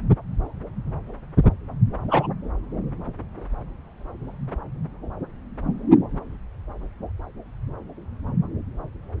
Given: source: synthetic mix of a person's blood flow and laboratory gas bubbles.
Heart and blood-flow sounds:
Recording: Doppler ultrasound of blood flow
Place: subclavian vein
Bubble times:
2.08-2.28 s: bubbles
From the record:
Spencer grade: 1 (occasional bubble signal discernible with the cardiac motion signal, with majority of cardiac periods free of bubbles)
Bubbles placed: anywhere in the cardiac cycle

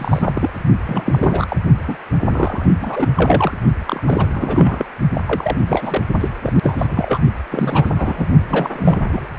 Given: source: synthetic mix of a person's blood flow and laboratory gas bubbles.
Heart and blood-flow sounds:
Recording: Doppler ultrasound of blood flow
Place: precordium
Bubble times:
0.00-0.50 s: bubbles
0.85-1.46 s: bubbles
1.49-1.57 s: bubbles
1.87-1.97 s: bubbles
2.29-2.66 s: bubbles
2.81-3.08 s: bubbles
3.15-3.52 s: bubbles
3.86-4.26 s: bubbles
4.33-4.85 s: bubbles
5.14-5.21 s: bubbles
5.25-5.57 s: bubbles
5.67-6.02 s: bubbles
6.20-6.29 s: bubbles
6.43-6.52 s: bubbles
6.62-7.19 s: bubbles
7.51-8.28 s: bubbles
8.48-8.98 s: bubbles
9.09-9.29 s: bubbles
From the record:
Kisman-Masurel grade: 342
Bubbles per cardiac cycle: rolling drumbeat, 9 or more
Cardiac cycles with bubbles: 100%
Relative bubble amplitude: moderate (0.250 to 0.450)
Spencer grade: 3 (all of the cardiac periods contain showers or single bubble signals, but not dominating or overriding the cardiac motion signals)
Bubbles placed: only in the low amplitude regions of the cardiac cycle

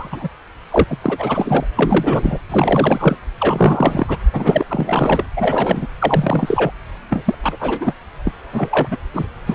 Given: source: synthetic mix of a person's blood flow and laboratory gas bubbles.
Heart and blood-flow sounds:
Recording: Doppler ultrasound of blood flow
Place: subclavian vein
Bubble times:
0.00-0.29 s: bubbles
0.70-0.84 s: bubbles
0.88-0.97 s: bubbles
1.02-1.67 s: bubbles
1.75-2.38 s: bubbles
2.50-3.17 s: bubbles
3.40-4.17 s: bubbles
4.32-4.64 s: bubbles
4.67-5.24 s: bubbles
5.35-5.88 s: bubbles
5.99-6.71 s: bubbles
7.09-7.35 s: bubbles
7.43-7.94 s: bubbles
8.25-8.33 s: bubbles
8.52-8.87 s: bubbles
8.91-8.97 s: bubbles
9.13-9.27 s: bubbles
9.46-9.55 s: bubbles
From the record:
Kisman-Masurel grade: 343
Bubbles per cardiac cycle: rolling drumbeat, 9 or more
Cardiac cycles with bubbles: 100%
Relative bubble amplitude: loud (0.450 to 0.775)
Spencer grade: 3 (all of the cardiac periods contain showers or single bubble signals, but not dominating or overriding the cardiac motion signals)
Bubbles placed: anywhere in the cardiac cycle

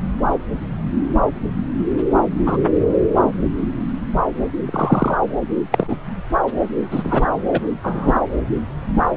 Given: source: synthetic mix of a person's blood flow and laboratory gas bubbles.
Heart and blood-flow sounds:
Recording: Doppler ultrasound of blood flow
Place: subclavian vein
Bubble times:
2.46-2.57 s: bubbles
4.66-5.17 s: bubbles
5.72-5.99 s: bubbles
6.91-7.27 s: bubbles
7.52-7.61 s: bubbles
7.84-8.20 s: bubbles
From the record:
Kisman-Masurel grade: 123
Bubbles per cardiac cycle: 1 to 2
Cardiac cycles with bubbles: 10 to 50%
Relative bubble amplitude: loud (0.450 to 0.775)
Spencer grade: 2 (many but less than half of the cardiac periods contain bubble signals, singularly or in groups)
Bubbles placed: anywhere in the cardiac cycle

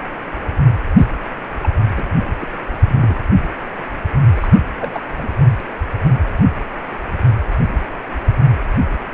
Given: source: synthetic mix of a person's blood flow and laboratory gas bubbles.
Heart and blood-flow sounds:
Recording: Doppler ultrasound of blood flow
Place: precordium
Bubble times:
0.97-1.05 s: bubbles
1.63-1.70 s: bubbles
1.97-2.05 s: bubbles
2.39-2.47 s: bubbles
2.87-3.16 s: bubbles
4.36-4.58 s: bubbles
4.79-5.00 s: bubbles
5.16-5.29 s: bubbles
From the record:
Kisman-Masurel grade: 221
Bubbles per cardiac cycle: several, 3 to 8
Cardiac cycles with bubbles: 10 to 50%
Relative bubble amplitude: barely perceptible (0.100 to 0.250)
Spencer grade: 2 (many but less than half of the cardiac periods contain bubble signals, singularly or in groups)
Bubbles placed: anywhere in the cardiac cycle

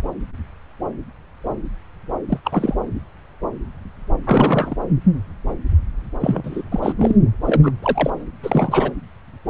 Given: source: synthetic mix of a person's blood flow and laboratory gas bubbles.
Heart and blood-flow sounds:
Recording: Doppler ultrasound of blood flow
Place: subclavian vein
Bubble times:
2.29-2.40 s: bubbles
2.44-2.75 s: bubbles
4.25-4.76 s: bubbles
6.20-6.63 s: bubbles
6.71-6.95 s: bubbles
6.98-7.15 s: bubbles
7.44-7.71 s: bubbles
7.82-8.11 s: bubbles
8.43-8.92 s: bubbles
From the record:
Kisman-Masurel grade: 223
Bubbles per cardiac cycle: several, 3 to 8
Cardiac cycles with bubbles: 10 to 50%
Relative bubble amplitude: loud (0.450 to 0.775)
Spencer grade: 2 (many but less than half of the cardiac periods contain bubble signals, singularly or in groups)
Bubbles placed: anywhere in the cardiac cycle

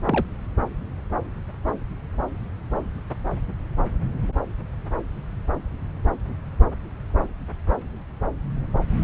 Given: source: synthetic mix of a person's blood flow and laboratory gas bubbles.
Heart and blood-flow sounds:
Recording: Doppler ultrasound of blood flow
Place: subclavian vein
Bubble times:
0.05-0.27 s: bubbles
From the record:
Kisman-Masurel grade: 111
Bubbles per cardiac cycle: 1 to 2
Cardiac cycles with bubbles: 1 to 10%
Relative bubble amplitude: barely perceptible (0.100 to 0.250)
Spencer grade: 1 (occasional bubble signal discernible with the cardiac motion signal, with majority of cardiac periods free of bubbles)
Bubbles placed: anywhere in the cardiac cycle

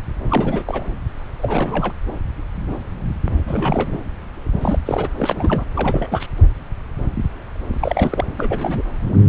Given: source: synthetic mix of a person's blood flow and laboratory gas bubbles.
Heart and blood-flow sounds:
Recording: Doppler ultrasound of blood flow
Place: subclavian vein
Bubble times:
0.30-0.85 s: bubbles
1.41-1.93 s: bubbles
3.47-3.98 s: bubbles
4.61-4.79 s: bubbles
4.85-5.08 s: bubbles
5.17-5.64 s: bubbles
5.76-6.27 s: bubbles
7.80-8.24 s: bubbles
8.38-8.83 s: bubbles
From the record:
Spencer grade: 3 (all of the cardiac periods contain showers or single bubble signals, but not dominating or overriding the cardiac motion signals)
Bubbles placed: anywhere in the cardiac cycle

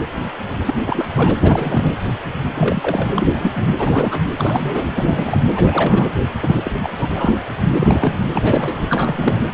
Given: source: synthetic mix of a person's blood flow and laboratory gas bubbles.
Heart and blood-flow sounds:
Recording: Doppler ultrasound of blood flow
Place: precordium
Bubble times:
0.65-0.74 s: bubbles
0.86-1.07 s: bubbles
1.15-1.36 s: bubbles
1.43-1.92 s: bubbles
2.54-3.08 s: bubbles
3.13-3.67 s: bubbles
3.76-4.21 s: bubbles
4.38-4.87 s: bubbles
4.92-5.42 s: bubbles
5.56-6.12 s: bubbles
6.42-6.71 s: bubbles
6.82-6.90 s: bubbles
6.99-7.36 s: bubbles
7.74-8.29 s: bubbles
8.32-8.82 s: bubbles
8.88-9.39 s: bubbles
From the record:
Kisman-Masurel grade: 332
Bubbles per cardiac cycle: rolling drumbeat, 9 or more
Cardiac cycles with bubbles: 50 to 99%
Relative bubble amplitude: moderate (0.250 to 0.450)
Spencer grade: 3 (all of the cardiac periods contain showers or single bubble signals, but not dominating or overriding the cardiac motion signals)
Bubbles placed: anywhere in the cardiac cycle

